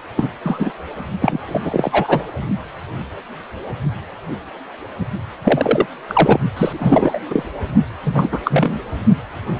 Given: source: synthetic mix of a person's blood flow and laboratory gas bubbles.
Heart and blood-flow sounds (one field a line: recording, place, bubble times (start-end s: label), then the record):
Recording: Doppler ultrasound of blood flow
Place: precordium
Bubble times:
0.16-0.30 s: bubbles
0.43-0.71 s: bubbles
1.19-2.26 s: bubbles
5.44-5.86 s: bubbles
6.08-6.40 s: bubbles
6.56-7.20 s: bubbles
7.30-7.43 s: bubbles
8.05-8.29 s: bubbles
8.32-8.39 s: bubbles
8.45-8.80 s: bubbles
From the record:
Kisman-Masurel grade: 233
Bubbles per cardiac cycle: several, 3 to 8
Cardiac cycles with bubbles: 50 to 99%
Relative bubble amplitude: loud (0.450 to 0.775)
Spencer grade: 3 (all of the cardiac periods contain showers or single bubble signals, but not dominating or overriding the cardiac motion signals)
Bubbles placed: only in the low amplitude regions of the cardiac cycle